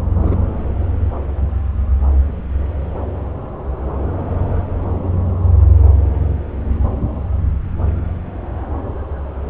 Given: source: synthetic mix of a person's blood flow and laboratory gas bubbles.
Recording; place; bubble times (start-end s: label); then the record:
Doppler ultrasound of blood flow; subclavian vein
0.21-0.35 s: bubbles
From the record:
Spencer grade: 1 (occasional bubble signal discernible with the cardiac motion signal, with majority of cardiac periods free of bubbles); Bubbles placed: anywhere in the cardiac cycle